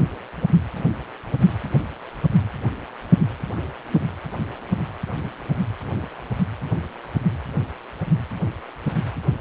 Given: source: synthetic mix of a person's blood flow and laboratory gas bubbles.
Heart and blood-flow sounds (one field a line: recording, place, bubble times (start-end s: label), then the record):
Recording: Doppler ultrasound of blood flow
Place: precordium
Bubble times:
no bubbles
From the record:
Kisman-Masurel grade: 000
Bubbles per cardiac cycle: 0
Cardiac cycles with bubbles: 0%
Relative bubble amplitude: no bubbles discernible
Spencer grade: 0 (complete lack of bubble signals)